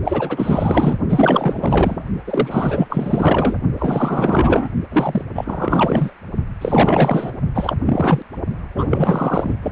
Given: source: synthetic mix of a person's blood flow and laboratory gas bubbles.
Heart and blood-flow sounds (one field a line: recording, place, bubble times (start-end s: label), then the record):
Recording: Doppler ultrasound of blood flow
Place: precordium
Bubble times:
0.04-0.97 s: bubbles
1.08-2.08 s: bubbles
2.27-3.58 s: bubbles
3.78-4.69 s: bubbles
4.92-5.25 s: bubbles
5.35-6.13 s: bubbles
6.61-7.32 s: bubbles
7.55-7.76 s: bubbles
7.86-8.22 s: bubbles
8.75-9.55 s: bubbles
9.62-9.72 s: bubbles
From the record:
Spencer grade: 4 (maximum detectable bubble signal sounding continuously throughout systole and diastole of every cardiac period, and overriding the amplitude of the normal cardiac signals)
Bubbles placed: only in the low amplitude regions of the cardiac cycle